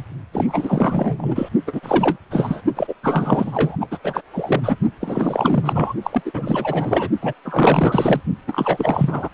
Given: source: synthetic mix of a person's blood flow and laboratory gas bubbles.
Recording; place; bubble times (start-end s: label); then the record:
Doppler ultrasound of blood flow; precordium
0.00-0.05 s: bubbles
0.33-1.49 s: bubbles
1.67-1.80 s: bubbles
1.83-2.17 s: bubbles
2.31-2.62 s: bubbles
2.76-2.94 s: bubbles
3.02-3.77 s: bubbles
3.81-3.88 s: bubbles
3.91-3.98 s: bubbles
4.04-4.21 s: bubbles
4.32-4.77 s: bubbles
5.01-5.94 s: bubbles
6.03-6.22 s: bubbles
6.25-7.10 s: bubbles
7.21-7.34 s: bubbles
7.45-8.21 s: bubbles
8.47-9.29 s: bubbles
From the record:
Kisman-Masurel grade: 444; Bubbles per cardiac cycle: continuous sound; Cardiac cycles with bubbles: 100%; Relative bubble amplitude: maximal (0.775 to 0.999); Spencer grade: 4 (maximum detectable bubble signal sounding continuously throughout systole and diastole of every cardiac period, and overriding the amplitude of the normal cardiac signals); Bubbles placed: only in the low amplitude regions of the cardiac cycle